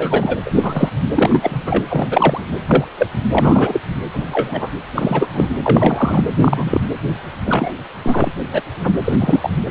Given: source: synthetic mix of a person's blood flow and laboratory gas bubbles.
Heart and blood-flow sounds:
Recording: Doppler ultrasound of blood flow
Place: precordium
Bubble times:
0.00-0.39 s: bubbles
0.45-0.90 s: bubbles
1.15-1.85 s: bubbles
1.88-2.44 s: bubbles
2.67-2.85 s: bubbles
2.98-3.07 s: bubbles
3.31-3.81 s: bubbles
4.13-4.26 s: bubbles
4.31-4.71 s: bubbles
4.95-5.28 s: bubbles
5.32-5.47 s: bubbles
5.63-6.24 s: bubbles
6.41-6.81 s: bubbles
7.45-7.71 s: bubbles
8.04-8.33 s: bubbles
8.52-8.62 s: bubbles
8.84-8.93 s: bubbles
9.04-9.16 s: bubbles
9.19-9.51 s: bubbles
From the record:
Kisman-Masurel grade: 243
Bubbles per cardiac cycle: several, 3 to 8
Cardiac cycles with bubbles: 100%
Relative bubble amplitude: loud (0.450 to 0.775)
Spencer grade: 3 (all of the cardiac periods contain showers or single bubble signals, but not dominating or overriding the cardiac motion signals)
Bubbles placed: anywhere in the cardiac cycle

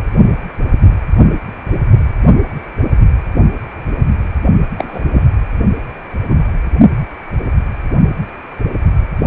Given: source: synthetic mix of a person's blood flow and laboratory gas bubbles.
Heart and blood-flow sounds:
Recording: Doppler ultrasound of blood flow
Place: precordium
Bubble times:
4.78-5.01 s: bubbles
5.13-5.22 s: bubbles
6.29-6.49 s: bubbles
From the record:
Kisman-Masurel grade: 123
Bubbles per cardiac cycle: 1 to 2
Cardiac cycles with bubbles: 10 to 50%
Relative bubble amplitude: loud (0.450 to 0.775)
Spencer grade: 2 (many but less than half of the cardiac periods contain bubble signals, singularly or in groups)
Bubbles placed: only in the low amplitude regions of the cardiac cycle

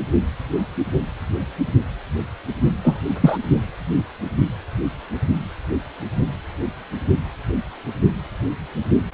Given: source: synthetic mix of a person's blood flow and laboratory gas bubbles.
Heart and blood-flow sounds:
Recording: Doppler ultrasound of blood flow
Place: precordium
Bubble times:
2.84-3.00 s: bubbles
3.21-3.38 s: bubbles
From the record:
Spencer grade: 1 (occasional bubble signal discernible with the cardiac motion signal, with majority of cardiac periods free of bubbles)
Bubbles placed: only in the low amplitude regions of the cardiac cycle

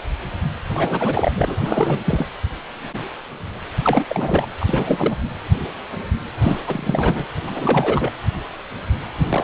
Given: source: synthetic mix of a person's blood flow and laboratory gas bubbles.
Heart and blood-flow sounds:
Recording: Doppler ultrasound of blood flow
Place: precordium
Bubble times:
0.74-1.32 s: bubbles
1.35-1.58 s: bubbles
1.60-2.00 s: bubbles
2.04-2.26 s: bubbles
3.82-4.04 s: bubbles
4.09-4.46 s: bubbles
4.60-5.16 s: bubbles
6.42-6.60 s: bubbles
6.67-7.26 s: bubbles
7.46-8.10 s: bubbles
9.29-9.44 s: bubbles
From the record:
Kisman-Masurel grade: 332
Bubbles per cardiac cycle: rolling drumbeat, 9 or more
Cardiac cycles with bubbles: 50 to 99%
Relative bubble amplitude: moderate (0.250 to 0.450)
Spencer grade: 3 (all of the cardiac periods contain showers or single bubble signals, but not dominating or overriding the cardiac motion signals)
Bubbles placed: anywhere in the cardiac cycle

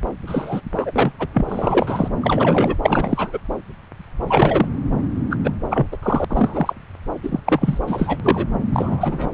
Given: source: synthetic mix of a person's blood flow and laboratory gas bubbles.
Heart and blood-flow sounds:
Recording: Doppler ultrasound of blood flow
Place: subclavian vein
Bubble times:
0.27-0.61 s: bubbles
0.72-0.92 s: bubbles
0.95-1.12 s: bubbles
1.19-1.27 s: bubbles
1.33-2.08 s: bubbles
2.21-2.75 s: bubbles
2.82-3.41 s: bubbles
4.27-4.68 s: bubbles
5.30-5.37 s: bubbles
5.44-5.50 s: bubbles
5.70-5.87 s: bubbles
5.92-5.97 s: bubbles
6.03-6.25 s: bubbles
6.29-6.74 s: bubbles
7.23-7.40 s: bubbles
7.46-7.78 s: bubbles
7.87-8.19 s: bubbles
8.23-8.46 s: bubbles
8.72-9.33 s: bubbles
From the record:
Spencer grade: 3 (all of the cardiac periods contain showers or single bubble signals, but not dominating or overriding the cardiac motion signals)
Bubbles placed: anywhere in the cardiac cycle

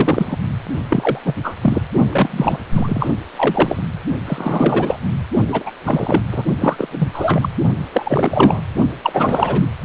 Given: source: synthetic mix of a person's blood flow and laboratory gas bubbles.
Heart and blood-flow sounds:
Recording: Doppler ultrasound of blood flow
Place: precordium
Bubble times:
0.00-0.36 s: bubbles
0.90-1.19 s: bubbles
1.24-1.34 s: bubbles
1.43-1.54 s: bubbles
1.61-1.82 s: bubbles
2.09-2.58 s: bubbles
2.74-3.09 s: bubbles
3.37-3.82 s: bubbles
4.27-4.97 s: bubbles
5.48-5.63 s: bubbles
5.66-5.71 s: bubbles
5.85-6.21 s: bubbles
6.31-6.44 s: bubbles
6.60-6.88 s: bubbles
6.91-7.08 s: bubbles
7.13-7.50 s: bubbles
7.92-8.61 s: bubbles
9.02-9.69 s: bubbles
From the record:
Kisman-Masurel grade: 343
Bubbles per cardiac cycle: rolling drumbeat, 9 or more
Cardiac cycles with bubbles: 100%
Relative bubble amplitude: loud (0.450 to 0.775)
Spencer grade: 3 (all of the cardiac periods contain showers or single bubble signals, but not dominating or overriding the cardiac motion signals)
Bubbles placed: only in the low amplitude regions of the cardiac cycle

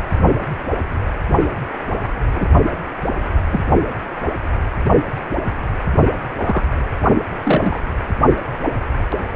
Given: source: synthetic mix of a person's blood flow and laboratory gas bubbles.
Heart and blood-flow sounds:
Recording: Doppler ultrasound of blood flow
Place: precordium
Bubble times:
2.35-2.48 s: bubbles
3.50-3.60 s: bubbles
6.44-6.62 s: bubbles
7.44-7.81 s: bubbles
From the record:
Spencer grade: 2 (many but less than half of the cardiac periods contain bubble signals, singularly or in groups)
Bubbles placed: only in the low amplitude regions of the cardiac cycle

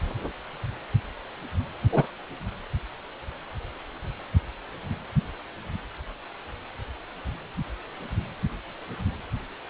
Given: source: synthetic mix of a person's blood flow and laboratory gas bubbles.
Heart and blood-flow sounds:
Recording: Doppler ultrasound of blood flow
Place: precordium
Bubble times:
1.82-2.04 s: bubbles
From the record:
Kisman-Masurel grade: 122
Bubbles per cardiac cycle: 1 to 2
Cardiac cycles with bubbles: 10 to 50%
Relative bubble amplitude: moderate (0.250 to 0.450)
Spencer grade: 2 (many but less than half of the cardiac periods contain bubble signals, singularly or in groups)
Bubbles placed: anywhere in the cardiac cycle

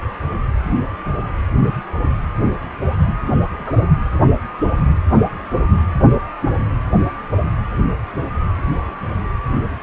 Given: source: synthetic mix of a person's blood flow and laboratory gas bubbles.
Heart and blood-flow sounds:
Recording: Doppler ultrasound of blood flow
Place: precordium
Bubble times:
3.26-3.37 s: bubbles
3.58-3.83 s: bubbles
From the record:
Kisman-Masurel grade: 112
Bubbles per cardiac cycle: 1 to 2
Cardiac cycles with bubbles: 1 to 10%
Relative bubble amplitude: moderate (0.250 to 0.450)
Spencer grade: 1 (occasional bubble signal discernible with the cardiac motion signal, with majority of cardiac periods free of bubbles)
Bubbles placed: anywhere in the cardiac cycle

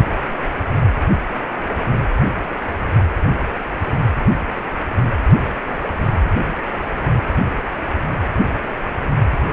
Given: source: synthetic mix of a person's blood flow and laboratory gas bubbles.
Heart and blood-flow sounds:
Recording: Doppler ultrasound of blood flow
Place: precordium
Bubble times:
no bubbles
From the record:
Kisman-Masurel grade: 000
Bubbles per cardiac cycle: 0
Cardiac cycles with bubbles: 0%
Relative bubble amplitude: no bubbles discernible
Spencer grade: 0 (complete lack of bubble signals)

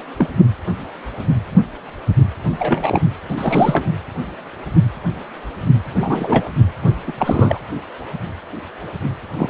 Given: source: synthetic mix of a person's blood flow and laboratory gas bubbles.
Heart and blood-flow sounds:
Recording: Doppler ultrasound of blood flow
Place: precordium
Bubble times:
0.17-0.28 s: bubbles
2.58-3.02 s: bubbles
3.29-3.92 s: bubbles
5.96-6.51 s: bubbles
7.07-7.12 s: bubbles
7.18-7.60 s: bubbles
9.37-9.50 s: bubbles
From the record:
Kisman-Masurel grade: 233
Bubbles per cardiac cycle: several, 3 to 8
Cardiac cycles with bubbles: 50 to 99%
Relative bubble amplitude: loud (0.450 to 0.775)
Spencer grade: 3 (all of the cardiac periods contain showers or single bubble signals, but not dominating or overriding the cardiac motion signals)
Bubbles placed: anywhere in the cardiac cycle

